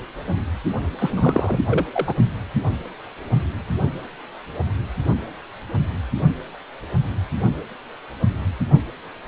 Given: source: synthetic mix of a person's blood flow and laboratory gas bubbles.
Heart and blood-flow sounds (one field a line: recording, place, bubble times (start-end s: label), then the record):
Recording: Doppler ultrasound of blood flow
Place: precordium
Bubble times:
0.99-1.61 s: bubbles
1.69-1.86 s: bubbles
1.93-2.14 s: bubbles
From the record:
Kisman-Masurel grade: 212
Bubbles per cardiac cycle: several, 3 to 8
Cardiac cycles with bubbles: 1 to 10%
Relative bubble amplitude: moderate (0.250 to 0.450)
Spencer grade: 1 (occasional bubble signal discernible with the cardiac motion signal, with majority of cardiac periods free of bubbles)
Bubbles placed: only in the low amplitude regions of the cardiac cycle